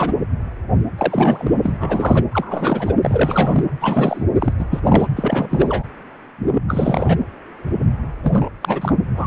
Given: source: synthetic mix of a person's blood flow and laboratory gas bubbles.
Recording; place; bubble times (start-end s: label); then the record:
Doppler ultrasound of blood flow; precordium
0.00-0.13 s: bubbles
0.97-1.52 s: bubbles
1.62-1.77 s: bubbles
1.80-2.24 s: bubbles
2.31-2.95 s: bubbles
3.02-3.64 s: bubbles
3.81-4.24 s: bubbles
4.38-4.53 s: bubbles
4.58-4.65 s: bubbles
4.70-4.80 s: bubbles
4.83-5.08 s: bubbles
5.16-5.83 s: bubbles
6.68-7.18 s: bubbles
8.22-8.49 s: bubbles
8.61-8.99 s: bubbles
9.17-9.27 s: bubbles
From the record:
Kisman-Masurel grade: 332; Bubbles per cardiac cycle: rolling drumbeat, 9 or more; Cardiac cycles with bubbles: 50 to 99%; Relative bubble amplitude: moderate (0.250 to 0.450); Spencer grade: 3 (all of the cardiac periods contain showers or single bubble signals, but not dominating or overriding the cardiac motion signals); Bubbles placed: anywhere in the cardiac cycle